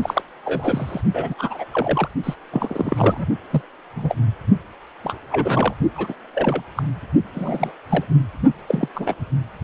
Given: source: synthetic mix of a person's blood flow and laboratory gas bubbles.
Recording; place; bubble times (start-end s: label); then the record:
Doppler ultrasound of blood flow; precordium
0.01-0.22 s: bubbles
0.45-1.01 s: bubbles
1.14-1.34 s: bubbles
1.38-1.65 s: bubbles
1.71-2.08 s: bubbles
2.23-2.34 s: bubbles
2.51-3.27 s: bubbles
3.50-3.62 s: bubbles
3.95-4.16 s: bubbles
5.04-5.18 s: bubbles
5.31-5.74 s: bubbles
5.96-6.15 s: bubbles
6.35-6.62 s: bubbles
6.75-6.83 s: bubbles
7.35-7.72 s: bubbles
7.90-8.04 s: bubbles
8.67-8.88 s: bubbles
8.95-9.14 s: bubbles
From the record:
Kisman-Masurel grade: 242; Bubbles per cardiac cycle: several, 3 to 8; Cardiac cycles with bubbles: 100%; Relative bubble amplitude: moderate (0.250 to 0.450); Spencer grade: 3 (all of the cardiac periods contain showers or single bubble signals, but not dominating or overriding the cardiac motion signals); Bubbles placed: only in the low amplitude regions of the cardiac cycle